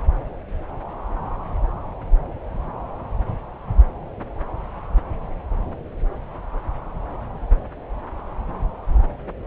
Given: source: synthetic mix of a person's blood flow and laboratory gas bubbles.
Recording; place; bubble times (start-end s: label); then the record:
Doppler ultrasound of blood flow; subclavian vein
no bubbles
From the record:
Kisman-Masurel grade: 000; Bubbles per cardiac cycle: 0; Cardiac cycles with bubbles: 0%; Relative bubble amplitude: no bubbles discernible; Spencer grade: 0 (complete lack of bubble signals)